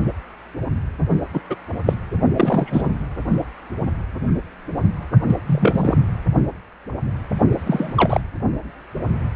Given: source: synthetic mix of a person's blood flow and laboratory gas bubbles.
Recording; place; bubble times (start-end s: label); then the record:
Doppler ultrasound of blood flow; precordium
1.33-1.41 s: bubbles
1.49-1.56 s: bubbles
1.85-1.95 s: bubbles
2.35-2.93 s: bubbles
5.26-5.38 s: bubbles
5.46-5.94 s: bubbles
7.67-7.93 s: bubbles
7.96-8.21 s: bubbles
From the record:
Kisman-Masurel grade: 223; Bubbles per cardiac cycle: several, 3 to 8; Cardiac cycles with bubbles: 10 to 50%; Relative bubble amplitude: loud (0.450 to 0.775); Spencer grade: 2 (many but less than half of the cardiac periods contain bubble signals, singularly or in groups); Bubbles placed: only in the low amplitude regions of the cardiac cycle